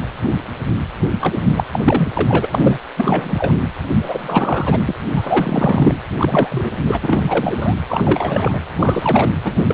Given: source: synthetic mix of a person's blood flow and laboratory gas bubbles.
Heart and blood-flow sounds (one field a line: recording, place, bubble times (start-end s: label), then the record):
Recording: Doppler ultrasound of blood flow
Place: precordium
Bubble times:
1.20-1.38 s: bubbles
1.43-1.64 s: bubbles
1.72-1.80 s: bubbles
1.84-2.08 s: bubbles
2.15-2.78 s: bubbles
2.96-3.53 s: bubbles
3.98-4.95 s: bubbles
5.16-5.97 s: bubbles
6.17-6.71 s: bubbles
6.87-6.98 s: bubbles
7.02-7.74 s: bubbles
7.88-8.58 s: bubbles
8.79-9.30 s: bubbles
9.44-9.59 s: bubbles
9.66-9.74 s: bubbles
From the record:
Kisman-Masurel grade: 333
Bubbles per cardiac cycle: rolling drumbeat, 9 or more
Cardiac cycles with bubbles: 50 to 99%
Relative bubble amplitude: loud (0.450 to 0.775)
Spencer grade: 3 (all of the cardiac periods contain showers or single bubble signals, but not dominating or overriding the cardiac motion signals)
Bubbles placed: anywhere in the cardiac cycle